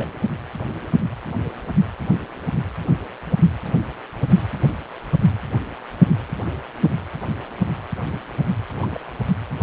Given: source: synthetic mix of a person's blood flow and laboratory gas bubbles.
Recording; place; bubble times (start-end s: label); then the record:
Doppler ultrasound of blood flow; precordium
0.00-0.12 s: bubbles
0.14-0.28 s: bubbles
8.82-8.87 s: bubbles
8.94-9.00 s: bubbles
From the record:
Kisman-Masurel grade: 121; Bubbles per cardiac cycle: 1 to 2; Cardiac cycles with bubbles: 10 to 50%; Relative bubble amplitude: barely perceptible (0.100 to 0.250); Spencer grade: 2 (many but less than half of the cardiac periods contain bubble signals, singularly or in groups); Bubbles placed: anywhere in the cardiac cycle